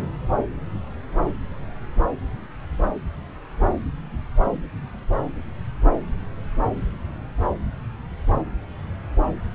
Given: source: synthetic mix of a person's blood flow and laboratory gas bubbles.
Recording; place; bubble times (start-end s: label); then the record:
Doppler ultrasound of blood flow; subclavian vein
no bubbles
From the record:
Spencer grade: 0 (complete lack of bubble signals)